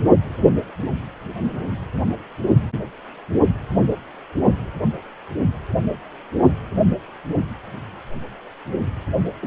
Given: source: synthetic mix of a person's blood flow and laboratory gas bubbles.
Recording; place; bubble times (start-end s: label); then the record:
Doppler ultrasound of blood flow; precordium
9.42-9.47 s: bubbles
From the record:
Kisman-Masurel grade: 112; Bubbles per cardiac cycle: 1 to 2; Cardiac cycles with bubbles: 1 to 10%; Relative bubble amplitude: moderate (0.250 to 0.450); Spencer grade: 1 (occasional bubble signal discernible with the cardiac motion signal, with majority of cardiac periods free of bubbles); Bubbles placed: only in the low amplitude regions of the cardiac cycle